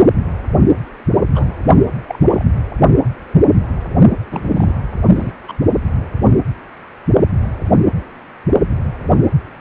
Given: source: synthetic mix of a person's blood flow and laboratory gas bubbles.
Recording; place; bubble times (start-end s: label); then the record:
Doppler ultrasound of blood flow; precordium
1.33-1.63 s: bubbles
2.07-2.19 s: bubbles
2.28-2.44 s: bubbles
4.31-4.79 s: bubbles
5.10-5.31 s: bubbles
5.47-5.52 s: bubbles
From the record:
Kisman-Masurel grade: 222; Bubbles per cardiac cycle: several, 3 to 8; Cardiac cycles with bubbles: 10 to 50%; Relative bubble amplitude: moderate (0.250 to 0.450); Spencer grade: 2 (many but less than half of the cardiac periods contain bubble signals, singularly or in groups); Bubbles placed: only in the low amplitude regions of the cardiac cycle